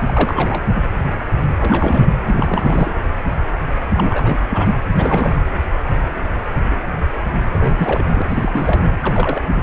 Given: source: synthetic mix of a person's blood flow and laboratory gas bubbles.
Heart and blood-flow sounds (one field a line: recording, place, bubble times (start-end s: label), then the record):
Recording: Doppler ultrasound of blood flow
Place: precordium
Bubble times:
0.07-0.65 s: bubbles
1.57-2.12 s: bubbles
2.25-2.93 s: bubbles
3.94-4.39 s: bubbles
4.50-4.73 s: bubbles
4.97-5.38 s: bubbles
7.50-8.03 s: bubbles
8.13-8.22 s: bubbles
8.29-8.92 s: bubbles
9.00-9.47 s: bubbles
9.55-9.62 s: bubbles
From the record:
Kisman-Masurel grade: 332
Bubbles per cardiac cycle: rolling drumbeat, 9 or more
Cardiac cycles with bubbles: 50 to 99%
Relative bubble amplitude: moderate (0.250 to 0.450)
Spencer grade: 3 (all of the cardiac periods contain showers or single bubble signals, but not dominating or overriding the cardiac motion signals)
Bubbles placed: anywhere in the cardiac cycle